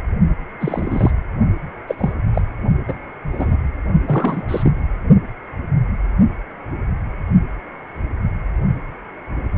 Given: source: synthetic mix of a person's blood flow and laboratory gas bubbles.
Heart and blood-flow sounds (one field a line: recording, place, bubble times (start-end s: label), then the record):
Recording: Doppler ultrasound of blood flow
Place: precordium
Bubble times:
0.60-1.11 s: bubbles
1.87-2.12 s: bubbles
2.34-2.42 s: bubbles
2.88-3.00 s: bubbles
3.31-3.56 s: bubbles
4.06-4.72 s: bubbles
From the record:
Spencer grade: 2 (many but less than half of the cardiac periods contain bubble signals, singularly or in groups)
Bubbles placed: only in the low amplitude regions of the cardiac cycle